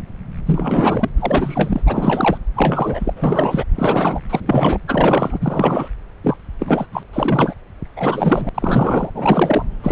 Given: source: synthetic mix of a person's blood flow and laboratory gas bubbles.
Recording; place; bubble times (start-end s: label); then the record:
Doppler ultrasound of blood flow; subclavian vein
0.46-1.09 s: bubbles
1.16-2.39 s: bubbles
2.55-3.14 s: bubbles
3.16-3.64 s: bubbles
3.75-4.20 s: bubbles
4.29-4.79 s: bubbles
4.88-5.88 s: bubbles
6.24-6.37 s: bubbles
6.59-6.86 s: bubbles
6.92-7.03 s: bubbles
7.13-7.54 s: bubbles
7.96-8.49 s: bubbles
8.54-9.11 s: bubbles
9.14-9.66 s: bubbles
9.83-9.91 s: bubbles
From the record:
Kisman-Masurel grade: 343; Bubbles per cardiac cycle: rolling drumbeat, 9 or more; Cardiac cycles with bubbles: 100%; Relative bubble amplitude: loud (0.450 to 0.775); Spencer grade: 3 (all of the cardiac periods contain showers or single bubble signals, but not dominating or overriding the cardiac motion signals); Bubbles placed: anywhere in the cardiac cycle